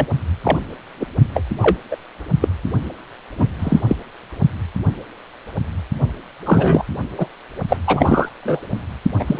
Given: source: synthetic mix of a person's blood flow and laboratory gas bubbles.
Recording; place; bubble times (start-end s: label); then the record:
Doppler ultrasound of blood flow; precordium
0.00-0.07 s: bubbles
0.43-0.59 s: bubbles
0.99-1.07 s: bubbles
1.34-1.43 s: bubbles
1.61-1.77 s: bubbles
1.91-1.97 s: bubbles
2.41-2.49 s: bubbles
3.38-3.48 s: bubbles
3.59-3.81 s: bubbles
3.88-3.96 s: bubbles
6.45-6.85 s: bubbles
7.17-7.27 s: bubbles
7.69-7.77 s: bubbles
7.86-8.29 s: bubbles
8.43-8.60 s: bubbles
9.19-9.39 s: bubbles
From the record:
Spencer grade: 3 (all of the cardiac periods contain showers or single bubble signals, but not dominating or overriding the cardiac motion signals); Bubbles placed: only in the low amplitude regions of the cardiac cycle